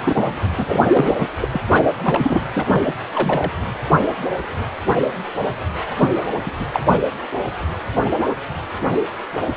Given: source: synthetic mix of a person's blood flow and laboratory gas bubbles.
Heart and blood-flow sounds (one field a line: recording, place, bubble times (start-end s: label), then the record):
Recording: Doppler ultrasound of blood flow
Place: precordium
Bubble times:
0.01-0.38 s: bubbles
0.57-0.87 s: bubbles
0.93-1.16 s: bubbles
1.19-1.28 s: bubbles
1.40-1.48 s: bubbles
1.50-1.61 s: bubbles
1.70-1.85 s: bubbles
2.02-2.44 s: bubbles
2.53-2.82 s: bubbles
2.85-2.95 s: bubbles
3.15-3.52 s: bubbles
5.97-6.09 s: bubbles
6.16-6.21 s: bubbles
6.46-6.51 s: bubbles
6.59-6.65 s: bubbles
6.73-6.79 s: bubbles
6.88-7.02 s: bubbles
From the record:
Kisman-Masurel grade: 332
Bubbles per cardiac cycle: rolling drumbeat, 9 or more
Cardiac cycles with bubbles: 50 to 99%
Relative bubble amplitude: moderate (0.250 to 0.450)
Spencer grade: 3 (all of the cardiac periods contain showers or single bubble signals, but not dominating or overriding the cardiac motion signals)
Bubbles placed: anywhere in the cardiac cycle